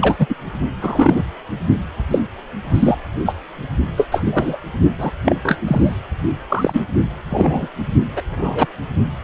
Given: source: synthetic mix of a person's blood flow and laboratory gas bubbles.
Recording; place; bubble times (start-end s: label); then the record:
Doppler ultrasound of blood flow; precordium
0.01-0.16 s: bubbles
0.19-0.26 s: bubbles
0.29-0.35 s: bubbles
0.82-1.23 s: bubbles
2.10-2.19 s: bubbles
2.74-2.98 s: bubbles
3.25-3.35 s: bubbles
3.96-4.08 s: bubbles
4.11-4.23 s: bubbles
4.26-4.57 s: bubbles
4.99-5.12 s: bubbles
5.25-5.36 s: bubbles
5.43-5.58 s: bubbles
5.67-5.96 s: bubbles
6.49-6.82 s: bubbles
7.29-7.68 s: bubbles
8.16-8.21 s: bubbles
8.31-8.67 s: bubbles
From the record:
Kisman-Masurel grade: 243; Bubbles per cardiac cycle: several, 3 to 8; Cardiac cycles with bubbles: 100%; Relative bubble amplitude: loud (0.450 to 0.775); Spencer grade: 3 (all of the cardiac periods contain showers or single bubble signals, but not dominating or overriding the cardiac motion signals); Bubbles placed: only in the low amplitude regions of the cardiac cycle